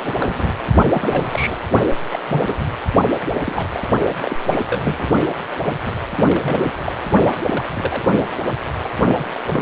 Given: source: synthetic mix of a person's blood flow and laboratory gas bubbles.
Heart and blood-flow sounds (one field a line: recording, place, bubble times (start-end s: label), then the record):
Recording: Doppler ultrasound of blood flow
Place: precordium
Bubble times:
0.00-0.15 s: bubbles
0.20-0.52 s: bubbles
0.91-1.58 s: bubbles
2.12-2.19 s: bubbles
2.28-2.54 s: bubbles
3.20-3.43 s: bubbles
3.46-3.68 s: bubbles
3.71-3.83 s: bubbles
4.21-4.36 s: bubbles
4.48-5.08 s: bubbles
5.62-5.74 s: bubbles
5.85-5.91 s: bubbles
6.16-6.71 s: bubbles
6.86-6.92 s: bubbles
7.46-7.63 s: bubbles
7.75-8.04 s: bubbles
8.46-8.53 s: bubbles
8.84-8.89 s: bubbles
9.05-9.25 s: bubbles
9.48-9.62 s: bubbles
From the record:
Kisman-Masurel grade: 242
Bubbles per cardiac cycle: several, 3 to 8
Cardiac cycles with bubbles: 100%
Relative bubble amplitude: moderate (0.250 to 0.450)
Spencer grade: 3 (all of the cardiac periods contain showers or single bubble signals, but not dominating or overriding the cardiac motion signals)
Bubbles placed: only in the low amplitude regions of the cardiac cycle